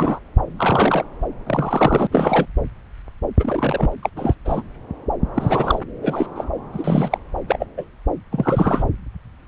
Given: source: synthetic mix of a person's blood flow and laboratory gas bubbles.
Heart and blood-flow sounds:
Doppler ultrasound of blood flow; subclavian vein
0.00-0.20 s: bubbles
0.57-1.05 s: bubbles
1.46-2.07 s: bubbles
2.11-2.47 s: bubbles
3.39-3.90 s: bubbles
4.02-4.09 s: bubbles
4.16-4.35 s: bubbles
4.45-4.62 s: bubbles
5.34-5.79 s: bubbles
6.02-6.27 s: bubbles
6.35-6.45 s: bubbles
6.72-7.18 s: bubbles
7.48-7.67 s: bubbles
7.77-7.85 s: bubbles
8.31-8.83 s: bubbles
From the record:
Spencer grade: 3 (all of the cardiac periods contain showers or single bubble signals, but not dominating or overriding the cardiac motion signals); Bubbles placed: anywhere in the cardiac cycle

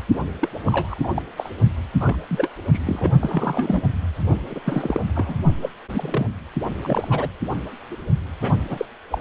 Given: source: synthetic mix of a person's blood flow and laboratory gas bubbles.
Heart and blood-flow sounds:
Doppler ultrasound of blood flow; precordium
0.42-0.49 s: bubbles
0.65-1.08 s: bubbles
1.15-1.22 s: bubbles
1.37-1.50 s: bubbles
2.00-2.17 s: bubbles
2.29-2.51 s: bubbles
2.73-2.79 s: bubbles
2.85-3.11 s: bubbles
3.21-3.82 s: bubbles
4.50-4.60 s: bubbles
4.66-5.01 s: bubbles
5.16-5.36 s: bubbles
5.62-5.70 s: bubbles
5.91-6.27 s: bubbles
6.82-7.29 s: bubbles
7.91-7.97 s: bubbles
8.41-8.54 s: bubbles
8.69-8.86 s: bubbles
9.12-9.21 s: bubbles
From the record:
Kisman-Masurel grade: 232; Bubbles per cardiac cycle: several, 3 to 8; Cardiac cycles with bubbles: 50 to 99%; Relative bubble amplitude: moderate (0.250 to 0.450); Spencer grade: 3 (all of the cardiac periods contain showers or single bubble signals, but not dominating or overriding the cardiac motion signals); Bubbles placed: only in the low amplitude regions of the cardiac cycle

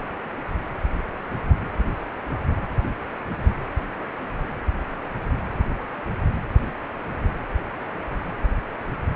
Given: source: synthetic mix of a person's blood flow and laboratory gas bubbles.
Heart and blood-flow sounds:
Doppler ultrasound of blood flow; precordium
no bubbles
From the record:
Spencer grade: 0 (complete lack of bubble signals)

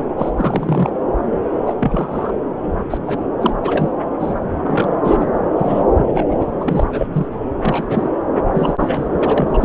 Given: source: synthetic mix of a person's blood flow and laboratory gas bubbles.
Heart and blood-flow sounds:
Doppler ultrasound of blood flow; subclavian vein
0.00-0.05 s: bubbles
0.18-0.30 s: bubbles
0.37-0.90 s: bubbles
1.66-1.74 s: bubbles
1.79-2.33 s: bubbles
2.58-2.86 s: bubbles
2.90-2.98 s: bubbles
3.06-3.24 s: bubbles
3.40-3.54 s: bubbles
3.62-3.89 s: bubbles
4.20-4.34 s: bubbles
4.42-4.96 s: bubbles
5.05-5.25 s: bubbles
5.58-5.83 s: bubbles
5.96-6.53 s: bubbles
6.60-6.84 s: bubbles
6.92-7.07 s: bubbles
7.12-7.27 s: bubbles
7.58-8.11 s: bubbles
8.54-8.74 s: bubbles
8.80-9.17 s: bubbles
9.22-9.65 s: bubbles
From the record:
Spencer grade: 3 (all of the cardiac periods contain showers or single bubble signals, but not dominating or overriding the cardiac motion signals); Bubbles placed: anywhere in the cardiac cycle

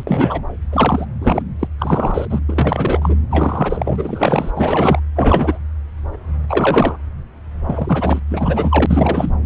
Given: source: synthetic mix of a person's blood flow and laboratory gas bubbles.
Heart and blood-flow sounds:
Doppler ultrasound of blood flow; subclavian vein
0.00-0.04 s: bubbles
0.07-0.45 s: bubbles
0.72-1.05 s: bubbles
1.20-1.42 s: bubbles
1.59-1.67 s: bubbles
1.78-2.27 s: bubbles
2.29-2.40 s: bubbles
2.48-3.17 s: bubbles
3.31-4.51 s: bubbles
4.55-5.00 s: bubbles
5.16-5.58 s: bubbles
6.48-6.96 s: bubbles
7.65-8.20 s: bubbles
8.30-9.30 s: bubbles
From the record:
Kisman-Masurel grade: 333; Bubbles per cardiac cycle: rolling drumbeat, 9 or more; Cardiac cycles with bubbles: 50 to 99%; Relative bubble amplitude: loud (0.450 to 0.775); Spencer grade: 3 (all of the cardiac periods contain showers or single bubble signals, but not dominating or overriding the cardiac motion signals); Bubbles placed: anywhere in the cardiac cycle

